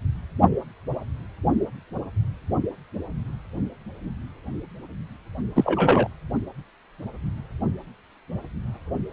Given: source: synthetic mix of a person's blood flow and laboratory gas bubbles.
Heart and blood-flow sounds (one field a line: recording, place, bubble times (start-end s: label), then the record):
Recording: Doppler ultrasound of blood flow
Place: precordium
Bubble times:
5.55-6.08 s: bubbles
From the record:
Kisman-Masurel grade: 213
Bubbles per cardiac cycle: several, 3 to 8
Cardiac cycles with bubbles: 1 to 10%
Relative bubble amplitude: loud (0.450 to 0.775)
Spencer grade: 1 (occasional bubble signal discernible with the cardiac motion signal, with majority of cardiac periods free of bubbles)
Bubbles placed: only in the low amplitude regions of the cardiac cycle